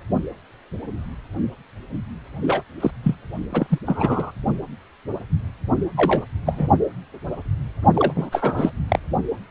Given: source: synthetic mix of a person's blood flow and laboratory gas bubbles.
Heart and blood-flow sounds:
Doppler ultrasound of blood flow; precordium
2.42-2.62 s: bubbles
2.80-2.91 s: bubbles
3.04-3.15 s: bubbles
3.53-3.79 s: bubbles
3.87-4.32 s: bubbles
5.97-6.25 s: bubbles
6.46-6.70 s: bubbles
7.95-8.29 s: bubbles
8.32-8.70 s: bubbles
8.88-8.99 s: bubbles
From the record:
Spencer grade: 3 (all of the cardiac periods contain showers or single bubble signals, but not dominating or overriding the cardiac motion signals); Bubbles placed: only in the low amplitude regions of the cardiac cycle

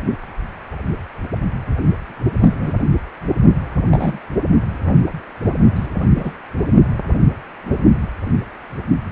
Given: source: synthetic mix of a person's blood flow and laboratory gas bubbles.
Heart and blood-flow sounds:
Doppler ultrasound of blood flow; precordium
2.42-2.71 s: bubbles
3.91-4.19 s: bubbles
5.75-5.87 s: bubbles
6.17-6.30 s: bubbles
From the record:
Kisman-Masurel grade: 122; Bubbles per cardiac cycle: 1 to 2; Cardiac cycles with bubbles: 10 to 50%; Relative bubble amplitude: moderate (0.250 to 0.450); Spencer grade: 2 (many but less than half of the cardiac periods contain bubble signals, singularly or in groups); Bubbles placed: only in the low amplitude regions of the cardiac cycle

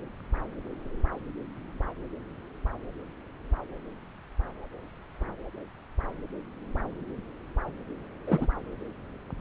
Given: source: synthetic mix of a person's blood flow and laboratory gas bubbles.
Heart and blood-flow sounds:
Doppler ultrasound of blood flow; subclavian vein
8.27-8.46 s: bubbles
From the record:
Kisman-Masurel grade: 111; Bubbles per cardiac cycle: 1 to 2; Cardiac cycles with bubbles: 1 to 10%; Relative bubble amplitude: barely perceptible (0.100 to 0.250); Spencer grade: 1 (occasional bubble signal discernible with the cardiac motion signal, with majority of cardiac periods free of bubbles); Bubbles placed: anywhere in the cardiac cycle

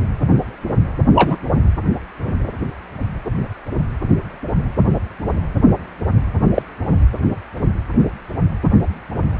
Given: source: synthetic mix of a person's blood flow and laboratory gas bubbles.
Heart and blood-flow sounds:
Doppler ultrasound of blood flow; precordium
1.15-1.36 s: bubbles
6.54-6.62 s: bubbles
From the record:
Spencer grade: 2 (many but less than half of the cardiac periods contain bubble signals, singularly or in groups); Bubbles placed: anywhere in the cardiac cycle

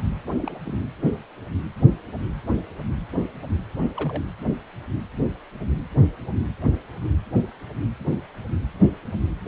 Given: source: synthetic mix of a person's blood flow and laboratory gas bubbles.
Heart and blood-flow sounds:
Doppler ultrasound of blood flow; precordium
0.39-0.59 s: bubbles
0.66-0.80 s: bubbles
3.95-4.23 s: bubbles
From the record:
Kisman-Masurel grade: 211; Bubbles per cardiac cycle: several, 3 to 8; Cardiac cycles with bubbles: 1 to 10%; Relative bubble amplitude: barely perceptible (0.100 to 0.250); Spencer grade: 1 (occasional bubble signal discernible with the cardiac motion signal, with majority of cardiac periods free of bubbles); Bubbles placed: anywhere in the cardiac cycle

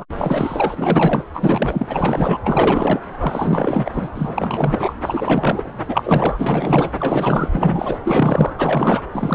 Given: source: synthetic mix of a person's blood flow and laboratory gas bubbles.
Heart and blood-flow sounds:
Doppler ultrasound of blood flow; subclavian vein
0.00-0.05 s: bubbles
0.17-1.24 s: bubbles
1.33-1.86 s: bubbles
1.90-2.39 s: bubbles
2.44-3.00 s: bubbles
3.20-4.09 s: bubbles
4.14-4.95 s: bubbles
5.02-5.73 s: bubbles
5.88-6.92 s: bubbles
6.98-7.49 s: bubbles
7.51-8.00 s: bubbles
8.05-8.54 s: bubbles
8.58-9.01 s: bubbles
9.12-9.35 s: bubbles
From the record:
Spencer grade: 4 (maximum detectable bubble signal sounding continuously throughout systole and diastole of every cardiac period, and overriding the amplitude of the normal cardiac signals); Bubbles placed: anywhere in the cardiac cycle

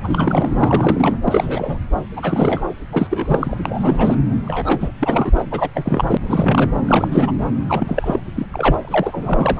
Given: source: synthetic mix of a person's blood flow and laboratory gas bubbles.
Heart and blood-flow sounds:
Doppler ultrasound of blood flow; subclavian vein
0.04-0.51 s: bubbles
0.58-1.16 s: bubbles
1.28-1.79 s: bubbles
2.17-2.61 s: bubbles
2.92-3.57 s: bubbles
3.65-4.17 s: bubbles
4.45-4.92 s: bubbles
5.00-5.42 s: bubbles
5.51-5.69 s: bubbles
5.75-6.17 s: bubbles
6.29-6.70 s: bubbles
6.88-7.08 s: bubbles
7.12-7.31 s: bubbles
7.68-8.20 s: bubbles
8.36-8.46 s: bubbles
8.53-8.78 s: bubbles
8.80-9.60 s: bubbles
From the record:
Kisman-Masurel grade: 342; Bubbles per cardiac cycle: rolling drumbeat, 9 or more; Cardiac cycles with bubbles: 100%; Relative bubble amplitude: moderate (0.250 to 0.450); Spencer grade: 3 (all of the cardiac periods contain showers or single bubble signals, but not dominating or overriding the cardiac motion signals); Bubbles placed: anywhere in the cardiac cycle

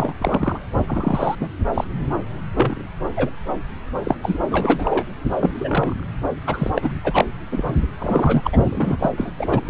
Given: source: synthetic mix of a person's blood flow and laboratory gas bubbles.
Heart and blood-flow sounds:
Doppler ultrasound of blood flow; subclavian vein
0.00-0.14 s: bubbles
0.18-0.59 s: bubbles
0.87-1.35 s: bubbles
1.40-1.48 s: bubbles
1.73-1.84 s: bubbles
2.56-2.83 s: bubbles
3.17-3.30 s: bubbles
4.04-4.16 s: bubbles
4.22-4.39 s: bubbles
4.51-5.08 s: bubbles
5.38-5.53 s: bubbles
5.60-6.04 s: bubbles
6.47-6.71 s: bubbles
6.75-6.99 s: bubbles
7.04-7.25 s: bubbles
7.51-7.87 s: bubbles
7.99-9.10 s: bubbles
9.18-9.34 s: bubbles
9.38-9.62 s: bubbles
9.65-9.70 s: bubbles
From the record:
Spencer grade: 3 (all of the cardiac periods contain showers or single bubble signals, but not dominating or overriding the cardiac motion signals); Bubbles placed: anywhere in the cardiac cycle

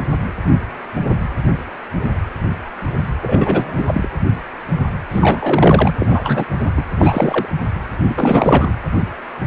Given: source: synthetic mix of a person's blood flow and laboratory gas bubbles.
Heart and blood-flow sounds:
Doppler ultrasound of blood flow; precordium
3.21-4.08 s: bubbles
5.09-5.93 s: bubbles
6.00-6.45 s: bubbles
6.77-6.82 s: bubbles
6.99-7.47 s: bubbles
8.09-8.72 s: bubbles
From the record:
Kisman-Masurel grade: 333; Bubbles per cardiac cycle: rolling drumbeat, 9 or more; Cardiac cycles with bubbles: 50 to 99%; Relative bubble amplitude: loud (0.450 to 0.775); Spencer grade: 3 (all of the cardiac periods contain showers or single bubble signals, but not dominating or overriding the cardiac motion signals); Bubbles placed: anywhere in the cardiac cycle

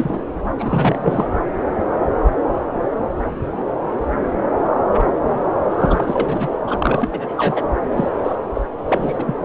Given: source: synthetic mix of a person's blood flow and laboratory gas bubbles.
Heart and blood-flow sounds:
Doppler ultrasound of blood flow; subclavian vein
0.00-0.21 s: bubbles
0.58-1.28 s: bubbles
5.70-6.49 s: bubbles
6.67-7.67 s: bubbles
7.97-8.08 s: bubbles
8.23-8.35 s: bubbles
8.54-8.61 s: bubbles
8.88-9.35 s: bubbles
From the record:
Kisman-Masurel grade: 333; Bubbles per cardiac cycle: rolling drumbeat, 9 or more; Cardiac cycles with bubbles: 50 to 99%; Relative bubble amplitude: loud (0.450 to 0.775); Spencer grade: 3 (all of the cardiac periods contain showers or single bubble signals, but not dominating or overriding the cardiac motion signals); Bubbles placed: anywhere in the cardiac cycle

